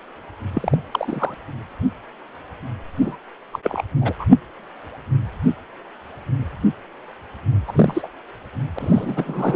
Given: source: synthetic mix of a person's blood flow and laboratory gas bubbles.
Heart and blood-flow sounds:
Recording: Doppler ultrasound of blood flow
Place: precordium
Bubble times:
0.53-0.76 s: bubbles
0.91-1.34 s: bubbles
3.01-3.17 s: bubbles
3.52-3.59 s: bubbles
3.63-3.82 s: bubbles
4.00-4.13 s: bubbles
4.19-4.25 s: bubbles
7.67-8.08 s: bubbles
8.76-9.55 s: bubbles
From the record:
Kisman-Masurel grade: 222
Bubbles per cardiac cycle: several, 3 to 8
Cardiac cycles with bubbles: 10 to 50%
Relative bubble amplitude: moderate (0.250 to 0.450)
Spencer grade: 2 (many but less than half of the cardiac periods contain bubble signals, singularly or in groups)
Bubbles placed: anywhere in the cardiac cycle

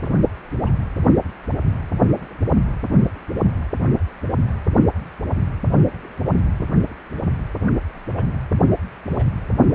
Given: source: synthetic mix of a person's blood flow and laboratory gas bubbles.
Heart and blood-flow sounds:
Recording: Doppler ultrasound of blood flow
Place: precordium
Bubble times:
0.01-0.11 s: bubbles
0.64-0.72 s: bubbles
8.16-8.23 s: bubbles
9.16-9.26 s: bubbles
From the record:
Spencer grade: 2 (many but less than half of the cardiac periods contain bubble signals, singularly or in groups)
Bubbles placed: anywhere in the cardiac cycle

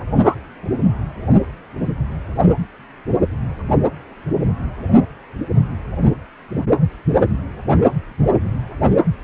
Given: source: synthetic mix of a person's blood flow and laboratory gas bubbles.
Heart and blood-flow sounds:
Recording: Doppler ultrasound of blood flow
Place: precordium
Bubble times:
0.23-0.35 s: bubbles
From the record:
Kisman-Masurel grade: 113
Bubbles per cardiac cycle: 1 to 2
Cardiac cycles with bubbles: 1 to 10%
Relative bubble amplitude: loud (0.450 to 0.775)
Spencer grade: 1 (occasional bubble signal discernible with the cardiac motion signal, with majority of cardiac periods free of bubbles)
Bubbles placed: only in the low amplitude regions of the cardiac cycle

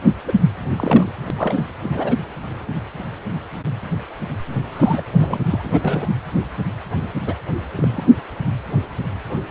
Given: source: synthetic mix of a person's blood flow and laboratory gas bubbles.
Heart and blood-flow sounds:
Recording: Doppler ultrasound of blood flow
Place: precordium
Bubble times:
0.26-0.33 s: bubbles
0.71-1.11 s: bubbles
1.26-1.30 s: bubbles
1.36-1.70 s: bubbles
1.82-2.17 s: bubbles
4.72-5.03 s: bubbles
5.11-5.38 s: bubbles
5.50-6.09 s: bubbles
7.26-7.34 s: bubbles
7.75-8.12 s: bubbles
From the record:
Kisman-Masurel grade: 232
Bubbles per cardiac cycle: several, 3 to 8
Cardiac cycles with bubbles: 50 to 99%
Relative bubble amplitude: moderate (0.250 to 0.450)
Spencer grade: 3 (all of the cardiac periods contain showers or single bubble signals, but not dominating or overriding the cardiac motion signals)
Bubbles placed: anywhere in the cardiac cycle

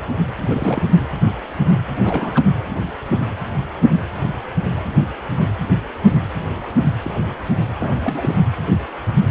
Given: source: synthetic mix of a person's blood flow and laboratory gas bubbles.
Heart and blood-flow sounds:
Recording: Doppler ultrasound of blood flow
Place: precordium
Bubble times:
0.45-0.87 s: bubbles
1.96-2.44 s: bubbles
7.03-7.29 s: bubbles
7.79-7.96 s: bubbles
8.03-8.35 s: bubbles
From the record:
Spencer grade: 2 (many but less than half of the cardiac periods contain bubble signals, singularly or in groups)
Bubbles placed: anywhere in the cardiac cycle

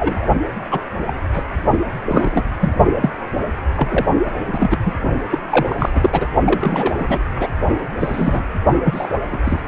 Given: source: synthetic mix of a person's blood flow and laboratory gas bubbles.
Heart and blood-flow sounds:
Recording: Doppler ultrasound of blood flow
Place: precordium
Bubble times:
0.00-0.27 s: bubbles
0.70-0.81 s: bubbles
1.07-1.13 s: bubbles
1.33-1.46 s: bubbles
2.08-2.42 s: bubbles
2.60-2.73 s: bubbles
3.00-3.11 s: bubbles
3.76-4.04 s: bubbles
4.46-4.79 s: bubbles
4.85-4.95 s: bubbles
5.30-5.38 s: bubbles
5.50-5.89 s: bubbles
5.93-6.10 s: bubbles
6.12-6.29 s: bubbles
6.44-6.94 s: bubbles
6.97-7.19 s: bubbles
7.38-7.48 s: bubbles
7.99-8.43 s: bubbles
8.84-9.08 s: bubbles
9.13-9.18 s: bubbles
9.32-9.38 s: bubbles
9.45-9.61 s: bubbles
From the record:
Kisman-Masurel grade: 243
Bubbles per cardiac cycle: several, 3 to 8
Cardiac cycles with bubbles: 100%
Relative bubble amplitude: loud (0.450 to 0.775)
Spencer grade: 3 (all of the cardiac periods contain showers or single bubble signals, but not dominating or overriding the cardiac motion signals)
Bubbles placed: only in the low amplitude regions of the cardiac cycle

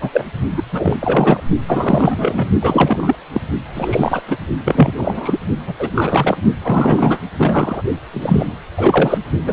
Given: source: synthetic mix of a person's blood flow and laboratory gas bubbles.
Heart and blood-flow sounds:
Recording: Doppler ultrasound of blood flow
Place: precordium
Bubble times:
0.01-0.25 s: bubbles
0.56-0.62 s: bubbles
0.71-0.97 s: bubbles
1.00-1.41 s: bubbles
1.67-2.51 s: bubbles
2.59-3.15 s: bubbles
3.33-3.40 s: bubbles
3.74-4.21 s: bubbles
4.28-4.37 s: bubbles
4.64-4.93 s: bubbles
4.97-5.39 s: bubbles
5.66-5.73 s: bubbles
5.79-5.90 s: bubbles
5.94-6.38 s: bubbles
6.63-7.23 s: bubbles
7.37-7.83 s: bubbles
8.11-8.58 s: bubbles
8.77-9.18 s: bubbles
9.45-9.53 s: bubbles
From the record:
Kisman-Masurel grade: 343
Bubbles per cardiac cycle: rolling drumbeat, 9 or more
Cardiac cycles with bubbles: 100%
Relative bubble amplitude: loud (0.450 to 0.775)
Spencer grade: 3 (all of the cardiac periods contain showers or single bubble signals, but not dominating or overriding the cardiac motion signals)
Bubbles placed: only in the low amplitude regions of the cardiac cycle

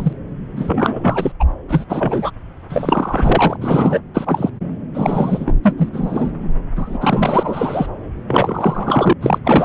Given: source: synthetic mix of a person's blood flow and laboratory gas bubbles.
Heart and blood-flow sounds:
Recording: Doppler ultrasound of blood flow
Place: subclavian vein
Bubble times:
0.00-0.13 s: bubbles
0.56-1.32 s: bubbles
1.40-1.45 s: bubbles
1.68-1.86 s: bubbles
1.89-2.30 s: bubbles
2.69-3.56 s: bubbles
3.60-4.01 s: bubbles
4.14-4.50 s: bubbles
4.94-5.54 s: bubbles
5.63-5.90 s: bubbles
5.93-6.31 s: bubbles
6.76-7.87 s: bubbles
8.27-9.13 s: bubbles
9.21-9.38 s: bubbles
9.44-9.65 s: bubbles
From the record:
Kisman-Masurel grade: 343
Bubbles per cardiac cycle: rolling drumbeat, 9 or more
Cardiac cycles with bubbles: 100%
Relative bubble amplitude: loud (0.450 to 0.775)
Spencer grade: 3 (all of the cardiac periods contain showers or single bubble signals, but not dominating or overriding the cardiac motion signals)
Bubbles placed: anywhere in the cardiac cycle

